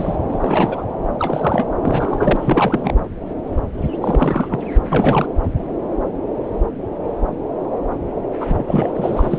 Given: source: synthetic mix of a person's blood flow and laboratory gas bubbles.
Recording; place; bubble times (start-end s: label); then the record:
Doppler ultrasound of blood flow; subclavian vein
0.00-0.16 s: bubbles
0.28-0.85 s: bubbles
1.19-1.68 s: bubbles
1.83-2.92 s: bubbles
4.01-4.63 s: bubbles
4.92-5.26 s: bubbles
8.40-9.39 s: bubbles
From the record:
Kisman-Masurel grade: 333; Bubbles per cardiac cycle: rolling drumbeat, 9 or more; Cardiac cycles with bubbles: 50 to 99%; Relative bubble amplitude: loud (0.450 to 0.775); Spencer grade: 3 (all of the cardiac periods contain showers or single bubble signals, but not dominating or overriding the cardiac motion signals); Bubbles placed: anywhere in the cardiac cycle